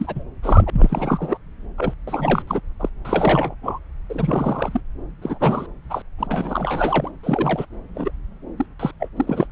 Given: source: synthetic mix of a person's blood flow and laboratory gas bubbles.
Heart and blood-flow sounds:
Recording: Doppler ultrasound of blood flow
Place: subclavian vein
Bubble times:
0.00-0.24 s: bubbles
0.42-1.38 s: bubbles
1.78-1.94 s: bubbles
2.07-2.42 s: bubbles
2.47-2.60 s: bubbles
2.79-2.89 s: bubbles
3.04-3.55 s: bubbles
3.63-3.78 s: bubbles
4.09-4.80 s: bubbles
5.21-5.67 s: bubbles
5.89-6.02 s: bubbles
6.18-7.11 s: bubbles
7.23-7.66 s: bubbles
7.95-8.11 s: bubbles
8.57-8.66 s: bubbles
8.79-8.91 s: bubbles
8.99-9.08 s: bubbles
9.16-9.47 s: bubbles
From the record:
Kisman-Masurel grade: 342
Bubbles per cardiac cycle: rolling drumbeat, 9 or more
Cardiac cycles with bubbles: 100%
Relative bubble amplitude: moderate (0.250 to 0.450)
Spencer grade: 3 (all of the cardiac periods contain showers or single bubble signals, but not dominating or overriding the cardiac motion signals)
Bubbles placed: anywhere in the cardiac cycle

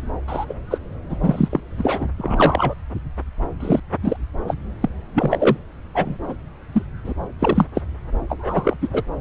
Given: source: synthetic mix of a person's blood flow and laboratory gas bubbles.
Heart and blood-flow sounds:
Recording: Doppler ultrasound of blood flow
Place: subclavian vein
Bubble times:
0.27-0.45 s: bubbles
0.49-0.53 s: bubbles
0.70-0.78 s: bubbles
1.09-1.17 s: bubbles
1.21-1.60 s: bubbles
1.78-2.10 s: bubbles
2.18-2.75 s: bubbles
3.60-3.80 s: bubbles
4.02-4.17 s: bubbles
4.47-4.54 s: bubbles
4.81-4.90 s: bubbles
5.14-5.57 s: bubbles
5.95-6.17 s: bubbles
6.28-6.34 s: bubbles
6.72-6.83 s: bubbles
7.04-7.14 s: bubbles
7.39-7.66 s: bubbles
7.75-7.82 s: bubbles
8.29-8.77 s: bubbles
8.81-8.88 s: bubbles
8.92-9.02 s: bubbles
From the record:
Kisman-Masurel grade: 243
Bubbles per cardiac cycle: several, 3 to 8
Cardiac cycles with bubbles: 100%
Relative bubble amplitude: loud (0.450 to 0.775)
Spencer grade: 3 (all of the cardiac periods contain showers or single bubble signals, but not dominating or overriding the cardiac motion signals)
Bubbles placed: anywhere in the cardiac cycle

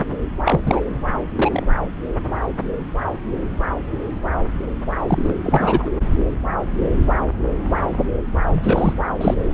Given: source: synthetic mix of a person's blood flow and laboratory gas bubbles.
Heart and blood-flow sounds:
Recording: Doppler ultrasound of blood flow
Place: subclavian vein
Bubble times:
0.44-0.60 s: bubbles
0.65-0.81 s: bubbles
1.35-1.63 s: bubbles
5.07-5.38 s: bubbles
5.43-5.90 s: bubbles
8.50-8.93 s: bubbles
9.17-9.34 s: bubbles
From the record:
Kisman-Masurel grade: 223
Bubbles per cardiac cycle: several, 3 to 8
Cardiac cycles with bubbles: 10 to 50%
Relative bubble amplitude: loud (0.450 to 0.775)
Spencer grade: 2 (many but less than half of the cardiac periods contain bubble signals, singularly or in groups)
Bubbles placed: anywhere in the cardiac cycle

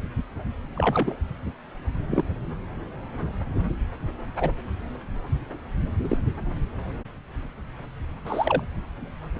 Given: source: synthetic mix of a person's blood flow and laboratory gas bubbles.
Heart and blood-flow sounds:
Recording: Doppler ultrasound of blood flow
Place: subclavian vein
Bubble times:
0.75-1.17 s: bubbles
2.10-2.24 s: bubbles
4.36-4.51 s: bubbles
6.03-6.17 s: bubbles
8.27-8.63 s: bubbles
From the record:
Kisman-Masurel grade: 122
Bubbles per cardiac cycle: 1 to 2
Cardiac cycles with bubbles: 10 to 50%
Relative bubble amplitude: moderate (0.250 to 0.450)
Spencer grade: 2 (many but less than half of the cardiac periods contain bubble signals, singularly or in groups)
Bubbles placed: anywhere in the cardiac cycle

